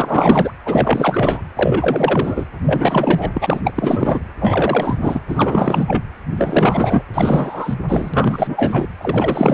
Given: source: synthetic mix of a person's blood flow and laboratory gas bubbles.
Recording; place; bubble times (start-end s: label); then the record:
Doppler ultrasound of blood flow; precordium
0.00-0.51 s: bubbles
0.65-1.40 s: bubbles
1.56-2.46 s: bubbles
2.62-3.32 s: bubbles
3.34-3.60 s: bubbles
3.64-4.24 s: bubbles
4.41-4.98 s: bubbles
5.01-5.21 s: bubbles
5.28-6.03 s: bubbles
6.36-7.03 s: bubbles
7.13-7.75 s: bubbles
7.88-8.87 s: bubbles
8.97-9.54 s: bubbles
From the record:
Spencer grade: 4 (maximum detectable bubble signal sounding continuously throughout systole and diastole of every cardiac period, and overriding the amplitude of the normal cardiac signals); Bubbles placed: anywhere in the cardiac cycle